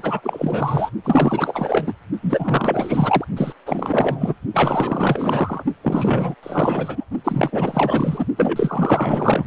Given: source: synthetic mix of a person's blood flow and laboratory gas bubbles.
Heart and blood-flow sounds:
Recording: Doppler ultrasound of blood flow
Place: precordium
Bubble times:
0.00-0.90 s: bubbles
1.04-1.94 s: bubbles
2.22-3.24 s: bubbles
3.36-3.52 s: bubbles
3.66-4.35 s: bubbles
4.54-5.63 s: bubbles
5.83-6.35 s: bubbles
6.43-7.06 s: bubbles
7.24-8.26 s: bubbles
8.37-9.45 s: bubbles
From the record:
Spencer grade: 4 (maximum detectable bubble signal sounding continuously throughout systole and diastole of every cardiac period, and overriding the amplitude of the normal cardiac signals)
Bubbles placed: only in the low amplitude regions of the cardiac cycle

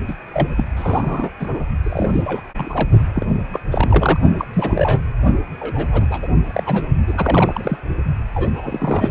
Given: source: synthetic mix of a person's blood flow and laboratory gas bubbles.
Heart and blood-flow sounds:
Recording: Doppler ultrasound of blood flow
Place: precordium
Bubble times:
0.08-0.14 s: bubbles
0.33-0.48 s: bubbles
0.56-0.64 s: bubbles
0.76-1.30 s: bubbles
1.39-1.63 s: bubbles
1.83-2.41 s: bubbles
2.56-2.88 s: bubbles
3.13-3.26 s: bubbles
3.52-3.60 s: bubbles
3.71-4.20 s: bubbles
4.39-4.45 s: bubbles
4.53-5.00 s: bubbles
5.60-6.07 s: bubbles
6.10-6.28 s: bubbles
6.43-6.89 s: bubbles
7.07-7.78 s: bubbles
8.35-9.11 s: bubbles
From the record:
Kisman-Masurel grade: 342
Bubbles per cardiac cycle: rolling drumbeat, 9 or more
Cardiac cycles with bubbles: 100%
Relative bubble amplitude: moderate (0.250 to 0.450)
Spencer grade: 3 (all of the cardiac periods contain showers or single bubble signals, but not dominating or overriding the cardiac motion signals)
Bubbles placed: only in the low amplitude regions of the cardiac cycle

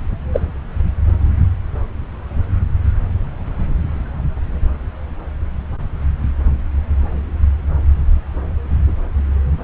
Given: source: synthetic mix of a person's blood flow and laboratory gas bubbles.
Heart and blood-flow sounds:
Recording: Doppler ultrasound of blood flow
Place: subclavian vein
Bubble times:
0.33-0.40 s: bubbles
From the record:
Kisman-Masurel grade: 113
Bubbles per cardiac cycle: 1 to 2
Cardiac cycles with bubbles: 1 to 10%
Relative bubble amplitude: loud (0.450 to 0.775)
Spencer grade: 1 (occasional bubble signal discernible with the cardiac motion signal, with majority of cardiac periods free of bubbles)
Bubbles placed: anywhere in the cardiac cycle

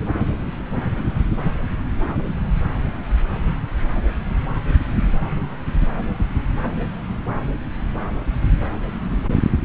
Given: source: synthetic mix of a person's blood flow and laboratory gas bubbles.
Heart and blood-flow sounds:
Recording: Doppler ultrasound of blood flow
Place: subclavian vein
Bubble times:
no bubbles
From the record:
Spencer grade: 0 (complete lack of bubble signals)

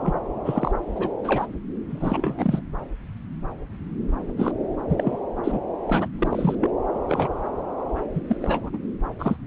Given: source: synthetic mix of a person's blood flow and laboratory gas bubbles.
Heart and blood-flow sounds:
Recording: Doppler ultrasound of blood flow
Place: subclavian vein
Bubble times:
0.00-0.19 s: bubbles
0.45-0.71 s: bubbles
0.95-1.11 s: bubbles
1.24-1.46 s: bubbles
1.90-2.61 s: bubbles
4.37-4.52 s: bubbles
4.89-5.18 s: bubbles
5.43-5.61 s: bubbles
5.87-6.08 s: bubbles
6.18-6.55 s: bubbles
6.61-6.71 s: bubbles
6.94-7.00 s: bubbles
7.08-7.29 s: bubbles
8.14-8.21 s: bubbles
8.27-8.37 s: bubbles
8.42-8.70 s: bubbles
8.73-8.78 s: bubbles
9.19-9.37 s: bubbles
From the record:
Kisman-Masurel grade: 232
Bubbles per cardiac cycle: several, 3 to 8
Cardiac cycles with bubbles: 50 to 99%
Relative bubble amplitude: moderate (0.250 to 0.450)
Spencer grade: 3 (all of the cardiac periods contain showers or single bubble signals, but not dominating or overriding the cardiac motion signals)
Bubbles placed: anywhere in the cardiac cycle

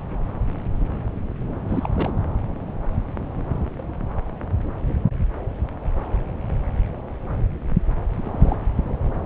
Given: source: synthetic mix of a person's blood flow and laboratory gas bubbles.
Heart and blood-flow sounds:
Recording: Doppler ultrasound of blood flow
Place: subclavian vein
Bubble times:
1.68-1.89 s: bubbles
1.95-2.12 s: bubbles
8.18-8.62 s: bubbles
From the record:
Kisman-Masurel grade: 222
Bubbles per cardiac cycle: several, 3 to 8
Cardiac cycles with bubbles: 10 to 50%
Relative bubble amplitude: moderate (0.250 to 0.450)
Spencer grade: 2 (many but less than half of the cardiac periods contain bubble signals, singularly or in groups)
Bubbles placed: anywhere in the cardiac cycle

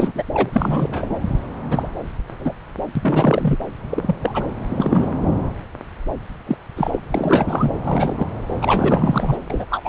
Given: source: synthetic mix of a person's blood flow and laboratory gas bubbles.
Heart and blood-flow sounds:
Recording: Doppler ultrasound of blood flow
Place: subclavian vein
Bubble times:
0.00-0.12 s: bubbles
0.14-0.23 s: bubbles
0.34-0.50 s: bubbles
0.53-1.15 s: bubbles
1.69-1.89 s: bubbles
2.39-2.53 s: bubbles
2.95-3.57 s: bubbles
3.90-4.15 s: bubbles
4.22-4.43 s: bubbles
4.64-5.11 s: bubbles
6.46-6.57 s: bubbles
6.76-6.99 s: bubbles
7.14-7.70 s: bubbles
7.83-8.26 s: bubbles
8.62-9.37 s: bubbles
9.50-9.65 s: bubbles
9.70-9.88 s: bubbles
From the record:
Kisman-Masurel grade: 233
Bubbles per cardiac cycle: several, 3 to 8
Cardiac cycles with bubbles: 50 to 99%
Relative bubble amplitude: loud (0.450 to 0.775)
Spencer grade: 3 (all of the cardiac periods contain showers or single bubble signals, but not dominating or overriding the cardiac motion signals)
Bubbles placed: anywhere in the cardiac cycle

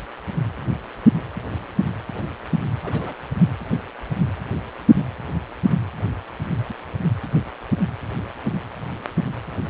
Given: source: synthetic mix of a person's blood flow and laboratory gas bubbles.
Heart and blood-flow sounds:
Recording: Doppler ultrasound of blood flow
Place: precordium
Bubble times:
2.83-3.14 s: bubbles
3.38-3.43 s: bubbles
From the record:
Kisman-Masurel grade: 111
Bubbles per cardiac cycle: 1 to 2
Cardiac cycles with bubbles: 1 to 10%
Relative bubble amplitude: barely perceptible (0.100 to 0.250)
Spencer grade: 1 (occasional bubble signal discernible with the cardiac motion signal, with majority of cardiac periods free of bubbles)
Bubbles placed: anywhere in the cardiac cycle

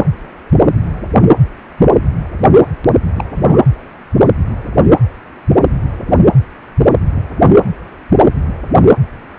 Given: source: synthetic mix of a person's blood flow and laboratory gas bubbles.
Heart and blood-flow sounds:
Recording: Doppler ultrasound of blood flow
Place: precordium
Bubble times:
3.16-3.25 s: bubbles
3.35-3.61 s: bubbles
From the record:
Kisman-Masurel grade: 212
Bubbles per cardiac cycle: several, 3 to 8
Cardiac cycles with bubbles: 1 to 10%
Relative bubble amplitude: moderate (0.250 to 0.450)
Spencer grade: 1 (occasional bubble signal discernible with the cardiac motion signal, with majority of cardiac periods free of bubbles)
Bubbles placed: anywhere in the cardiac cycle

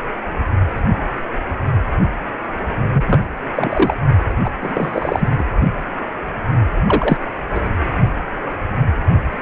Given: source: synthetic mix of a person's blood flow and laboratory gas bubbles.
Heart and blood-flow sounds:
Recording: Doppler ultrasound of blood flow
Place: precordium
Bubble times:
2.92-3.22 s: bubbles
3.55-3.94 s: bubbles
4.44-4.51 s: bubbles
4.61-5.29 s: bubbles
5.38-5.43 s: bubbles
6.87-7.17 s: bubbles
7.54-7.61 s: bubbles
From the record:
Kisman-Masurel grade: 233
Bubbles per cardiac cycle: several, 3 to 8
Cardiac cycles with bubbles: 50 to 99%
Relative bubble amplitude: loud (0.450 to 0.775)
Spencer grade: 3 (all of the cardiac periods contain showers or single bubble signals, but not dominating or overriding the cardiac motion signals)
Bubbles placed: anywhere in the cardiac cycle

